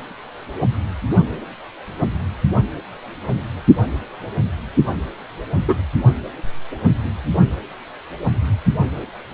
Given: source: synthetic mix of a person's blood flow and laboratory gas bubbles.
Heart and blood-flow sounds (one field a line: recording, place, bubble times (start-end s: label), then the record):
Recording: Doppler ultrasound of blood flow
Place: precordium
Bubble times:
5.68-5.75 s: bubbles
From the record:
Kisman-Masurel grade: 113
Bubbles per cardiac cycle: 1 to 2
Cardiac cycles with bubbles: 1 to 10%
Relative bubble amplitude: loud (0.450 to 0.775)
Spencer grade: 1 (occasional bubble signal discernible with the cardiac motion signal, with majority of cardiac periods free of bubbles)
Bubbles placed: only in the low amplitude regions of the cardiac cycle